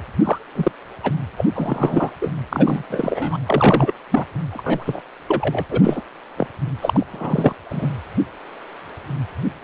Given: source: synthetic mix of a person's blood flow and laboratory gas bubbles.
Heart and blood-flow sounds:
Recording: Doppler ultrasound of blood flow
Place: precordium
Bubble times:
0.23-0.39 s: bubbles
0.55-0.71 s: bubbles
1.03-1.11 s: bubbles
1.37-1.45 s: bubbles
1.54-2.10 s: bubbles
2.21-2.32 s: bubbles
2.52-2.83 s: bubbles
2.90-3.37 s: bubbles
3.46-3.93 s: bubbles
4.11-4.25 s: bubbles
4.52-5.00 s: bubbles
5.28-5.64 s: bubbles
5.70-6.02 s: bubbles
6.38-6.47 s: bubbles
6.81-7.06 s: bubbles
7.13-7.53 s: bubbles
7.69-7.88 s: bubbles
From the record:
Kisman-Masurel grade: 233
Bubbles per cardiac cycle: several, 3 to 8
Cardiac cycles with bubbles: 50 to 99%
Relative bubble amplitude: loud (0.450 to 0.775)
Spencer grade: 3 (all of the cardiac periods contain showers or single bubble signals, but not dominating or overriding the cardiac motion signals)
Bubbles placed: anywhere in the cardiac cycle

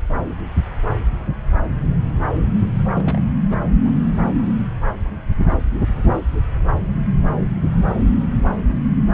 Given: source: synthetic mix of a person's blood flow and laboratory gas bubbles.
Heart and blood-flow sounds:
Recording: Doppler ultrasound of blood flow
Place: subclavian vein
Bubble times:
2.72-2.88 s: bubbles
2.95-3.40 s: bubbles
3.49-3.60 s: bubbles
3.85-3.91 s: bubbles
From the record:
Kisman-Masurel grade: 121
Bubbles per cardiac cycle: 1 to 2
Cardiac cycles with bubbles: 10 to 50%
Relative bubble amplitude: barely perceptible (0.100 to 0.250)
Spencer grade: 2 (many but less than half of the cardiac periods contain bubble signals, singularly or in groups)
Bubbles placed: anywhere in the cardiac cycle

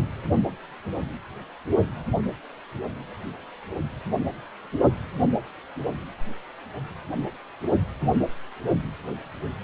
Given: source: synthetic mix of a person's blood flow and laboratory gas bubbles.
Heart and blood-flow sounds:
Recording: Doppler ultrasound of blood flow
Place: precordium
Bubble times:
no bubbles
From the record:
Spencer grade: 0 (complete lack of bubble signals)

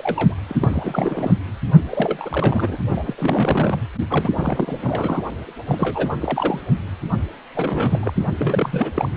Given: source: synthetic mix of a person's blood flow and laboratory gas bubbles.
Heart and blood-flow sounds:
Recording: Doppler ultrasound of blood flow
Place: precordium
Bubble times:
0.00-0.35 s: bubbles
0.48-0.56 s: bubbles
0.60-1.38 s: bubbles
1.90-2.77 s: bubbles
2.96-3.82 s: bubbles
4.09-4.30 s: bubbles
4.34-4.77 s: bubbles
4.80-5.21 s: bubbles
5.67-6.13 s: bubbles
6.19-6.60 s: bubbles
7.55-8.12 s: bubbles
8.15-8.26 s: bubbles
8.38-8.92 s: bubbles
8.96-9.09 s: bubbles
From the record:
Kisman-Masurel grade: 342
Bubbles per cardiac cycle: rolling drumbeat, 9 or more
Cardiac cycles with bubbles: 100%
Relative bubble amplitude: moderate (0.250 to 0.450)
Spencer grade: 3 (all of the cardiac periods contain showers or single bubble signals, but not dominating or overriding the cardiac motion signals)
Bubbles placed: anywhere in the cardiac cycle

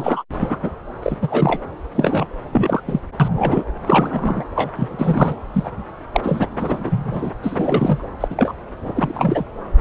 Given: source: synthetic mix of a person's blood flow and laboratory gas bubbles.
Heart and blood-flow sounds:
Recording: Doppler ultrasound of blood flow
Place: subclavian vein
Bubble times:
0.00-0.23 s: bubbles
0.40-0.57 s: bubbles
0.62-0.70 s: bubbles
1.02-1.17 s: bubbles
1.21-1.63 s: bubbles
1.94-2.25 s: bubbles
2.52-2.81 s: bubbles
2.87-3.00 s: bubbles
3.19-3.64 s: bubbles
3.87-4.44 s: bubbles
4.56-4.72 s: bubbles
4.76-5.35 s: bubbles
5.54-5.70 s: bubbles
6.12-6.21 s: bubbles
6.23-6.47 s: bubbles
6.58-7.31 s: bubbles
7.43-8.04 s: bubbles
8.20-8.52 s: bubbles
8.95-9.45 s: bubbles
From the record:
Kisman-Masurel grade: 243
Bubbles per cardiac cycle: several, 3 to 8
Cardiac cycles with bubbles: 100%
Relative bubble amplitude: loud (0.450 to 0.775)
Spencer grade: 3 (all of the cardiac periods contain showers or single bubble signals, but not dominating or overriding the cardiac motion signals)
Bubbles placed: anywhere in the cardiac cycle

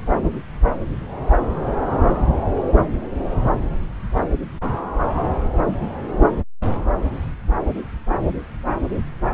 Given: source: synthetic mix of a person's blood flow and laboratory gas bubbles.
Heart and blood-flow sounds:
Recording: Doppler ultrasound of blood flow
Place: subclavian vein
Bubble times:
no bubbles
From the record:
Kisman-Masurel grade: 000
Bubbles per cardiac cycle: 0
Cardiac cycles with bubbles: 0%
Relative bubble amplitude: no bubbles discernible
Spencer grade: 0 (complete lack of bubble signals)

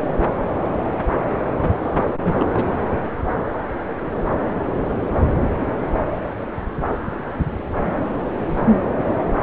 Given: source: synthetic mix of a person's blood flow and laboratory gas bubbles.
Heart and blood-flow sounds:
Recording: Doppler ultrasound of blood flow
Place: subclavian vein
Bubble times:
1.82-1.90 s: bubbles
1.96-2.04 s: bubbles
2.24-2.46 s: bubbles
2.53-2.65 s: bubbles
7.82-8.04 s: bubbles
8.50-8.72 s: bubbles
From the record:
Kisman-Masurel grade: 221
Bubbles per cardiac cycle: several, 3 to 8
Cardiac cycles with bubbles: 10 to 50%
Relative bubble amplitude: barely perceptible (0.100 to 0.250)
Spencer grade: 2 (many but less than half of the cardiac periods contain bubble signals, singularly or in groups)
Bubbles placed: anywhere in the cardiac cycle

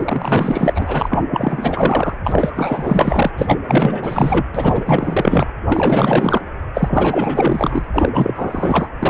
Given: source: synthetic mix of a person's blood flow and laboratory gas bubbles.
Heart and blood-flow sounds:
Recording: Doppler ultrasound of blood flow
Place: precordium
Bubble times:
0.00-1.23 s: bubbles
1.32-2.16 s: bubbles
2.23-3.31 s: bubbles
3.38-3.58 s: bubbles
3.67-4.45 s: bubbles
4.54-5.46 s: bubbles
5.68-6.42 s: bubbles
6.74-7.85 s: bubbles
7.93-8.09 s: bubbles
8.14-8.87 s: bubbles
8.99-9.10 s: bubbles
From the record:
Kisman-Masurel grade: 444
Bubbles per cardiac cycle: continuous sound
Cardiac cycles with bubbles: 100%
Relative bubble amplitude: maximal (0.775 to 0.999)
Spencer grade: 4 (maximum detectable bubble signal sounding continuously throughout systole and diastole of every cardiac period, and overriding the amplitude of the normal cardiac signals)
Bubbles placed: anywhere in the cardiac cycle

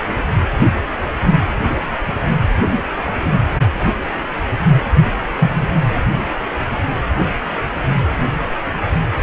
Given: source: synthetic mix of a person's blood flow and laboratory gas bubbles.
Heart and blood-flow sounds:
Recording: Doppler ultrasound of blood flow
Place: precordium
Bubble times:
5.39-5.63 s: bubbles
From the record:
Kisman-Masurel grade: 113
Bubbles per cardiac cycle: 1 to 2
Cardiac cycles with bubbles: 1 to 10%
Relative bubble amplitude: loud (0.450 to 0.775)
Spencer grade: 1 (occasional bubble signal discernible with the cardiac motion signal, with majority of cardiac periods free of bubbles)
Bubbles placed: anywhere in the cardiac cycle

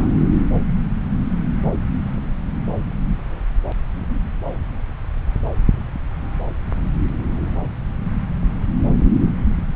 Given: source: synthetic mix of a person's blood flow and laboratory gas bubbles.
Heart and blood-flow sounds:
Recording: Doppler ultrasound of blood flow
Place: subclavian vein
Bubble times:
0.00-0.15 s: bubbles
From the record:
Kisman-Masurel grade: 221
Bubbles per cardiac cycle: several, 3 to 8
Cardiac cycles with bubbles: 10 to 50%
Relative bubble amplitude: barely perceptible (0.100 to 0.250)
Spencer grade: 2 (many but less than half of the cardiac periods contain bubble signals, singularly or in groups)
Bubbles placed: anywhere in the cardiac cycle

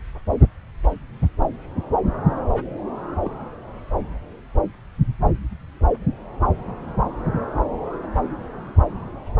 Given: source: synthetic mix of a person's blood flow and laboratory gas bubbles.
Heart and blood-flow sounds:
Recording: Doppler ultrasound of blood flow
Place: subclavian vein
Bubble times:
3.24-3.30 s: bubbles
From the record:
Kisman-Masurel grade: 111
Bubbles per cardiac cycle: 1 to 2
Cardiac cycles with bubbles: 1 to 10%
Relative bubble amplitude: barely perceptible (0.100 to 0.250)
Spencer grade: 1 (occasional bubble signal discernible with the cardiac motion signal, with majority of cardiac periods free of bubbles)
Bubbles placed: anywhere in the cardiac cycle

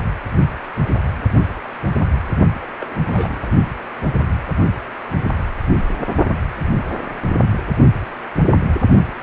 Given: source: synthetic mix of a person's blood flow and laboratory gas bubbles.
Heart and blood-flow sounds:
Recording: Doppler ultrasound of blood flow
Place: precordium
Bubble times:
2.62-2.65 s: bubbles
2.79-3.00 s: bubbles
3.09-3.53 s: bubbles
From the record:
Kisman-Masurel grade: 211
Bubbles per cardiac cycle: several, 3 to 8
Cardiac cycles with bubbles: 1 to 10%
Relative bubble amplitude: barely perceptible (0.100 to 0.250)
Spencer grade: 1 (occasional bubble signal discernible with the cardiac motion signal, with majority of cardiac periods free of bubbles)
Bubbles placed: only in the low amplitude regions of the cardiac cycle

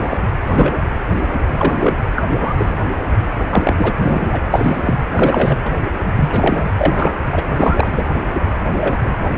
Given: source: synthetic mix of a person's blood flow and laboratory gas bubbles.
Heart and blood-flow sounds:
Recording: Doppler ultrasound of blood flow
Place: precordium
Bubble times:
0.01-0.17 s: bubbles
0.46-0.77 s: bubbles
1.58-1.94 s: bubbles
2.15-2.23 s: bubbles
2.36-2.54 s: bubbles
2.58-2.76 s: bubbles
3.50-3.93 s: bubbles
3.99-4.41 s: bubbles
4.51-4.99 s: bubbles
5.12-5.58 s: bubbles
5.64-5.71 s: bubbles
6.15-6.68 s: bubbles
6.77-7.12 s: bubbles
7.31-7.42 s: bubbles
7.57-8.07 s: bubbles
8.79-8.96 s: bubbles
9.04-9.18 s: bubbles
From the record:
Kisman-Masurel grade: 233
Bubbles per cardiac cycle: several, 3 to 8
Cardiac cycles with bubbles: 50 to 99%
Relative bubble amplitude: loud (0.450 to 0.775)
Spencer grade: 3 (all of the cardiac periods contain showers or single bubble signals, but not dominating or overriding the cardiac motion signals)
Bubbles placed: anywhere in the cardiac cycle

